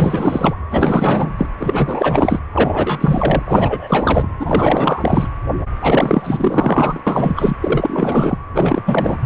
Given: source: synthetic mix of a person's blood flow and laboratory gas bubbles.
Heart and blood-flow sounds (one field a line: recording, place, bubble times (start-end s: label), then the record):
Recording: Doppler ultrasound of blood flow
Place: precordium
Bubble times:
0.00-0.54 s: bubbles
0.71-1.30 s: bubbles
1.38-1.46 s: bubbles
1.60-2.40 s: bubbles
2.53-3.43 s: bubbles
3.46-4.31 s: bubbles
4.39-5.28 s: bubbles
5.81-7.00 s: bubbles
7.07-7.56 s: bubbles
7.60-8.38 s: bubbles
8.54-8.82 s: bubbles
8.85-9.17 s: bubbles
From the record:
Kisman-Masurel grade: 444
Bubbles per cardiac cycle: continuous sound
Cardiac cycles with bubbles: 100%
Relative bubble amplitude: maximal (0.775 to 0.999)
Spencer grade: 4 (maximum detectable bubble signal sounding continuously throughout systole and diastole of every cardiac period, and overriding the amplitude of the normal cardiac signals)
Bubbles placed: anywhere in the cardiac cycle